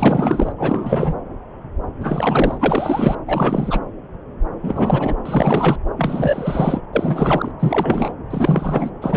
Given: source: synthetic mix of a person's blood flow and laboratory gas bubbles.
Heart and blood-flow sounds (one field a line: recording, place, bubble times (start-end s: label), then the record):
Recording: Doppler ultrasound of blood flow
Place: subclavian vein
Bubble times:
0.00-0.53 s: bubbles
0.58-1.15 s: bubbles
2.00-3.16 s: bubbles
3.27-3.80 s: bubbles
4.58-5.16 s: bubbles
5.25-5.77 s: bubbles
5.96-6.81 s: bubbles
6.92-7.51 s: bubbles
7.59-8.12 s: bubbles
8.30-8.90 s: bubbles
9.02-9.17 s: bubbles
From the record:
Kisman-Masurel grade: 333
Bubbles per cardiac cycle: rolling drumbeat, 9 or more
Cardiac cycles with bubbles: 50 to 99%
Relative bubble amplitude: loud (0.450 to 0.775)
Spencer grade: 3 (all of the cardiac periods contain showers or single bubble signals, but not dominating or overriding the cardiac motion signals)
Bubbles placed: anywhere in the cardiac cycle